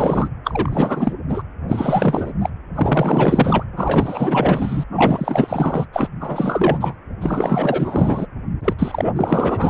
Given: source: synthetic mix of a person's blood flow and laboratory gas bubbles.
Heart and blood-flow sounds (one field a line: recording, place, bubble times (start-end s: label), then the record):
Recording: Doppler ultrasound of blood flow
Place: precordium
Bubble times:
0.00-0.28 s: bubbles
0.44-1.13 s: bubbles
1.28-1.42 s: bubbles
1.69-2.33 s: bubbles
2.41-2.50 s: bubbles
2.75-3.65 s: bubbles
3.76-4.84 s: bubbles
4.90-5.86 s: bubbles
5.93-6.10 s: bubbles
6.20-6.95 s: bubbles
7.21-8.27 s: bubbles
8.64-8.75 s: bubbles
8.79-9.05 s: bubbles
9.16-9.70 s: bubbles
From the record:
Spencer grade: 4 (maximum detectable bubble signal sounding continuously throughout systole and diastole of every cardiac period, and overriding the amplitude of the normal cardiac signals)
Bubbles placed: anywhere in the cardiac cycle